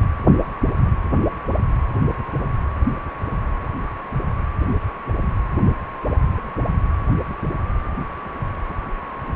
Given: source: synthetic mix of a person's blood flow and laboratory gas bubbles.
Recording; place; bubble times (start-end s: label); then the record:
Doppler ultrasound of blood flow; precordium
no bubbles
From the record:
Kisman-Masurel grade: 000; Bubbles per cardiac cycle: 0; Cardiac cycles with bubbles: 0%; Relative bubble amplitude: no bubbles discernible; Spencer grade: 0 (complete lack of bubble signals)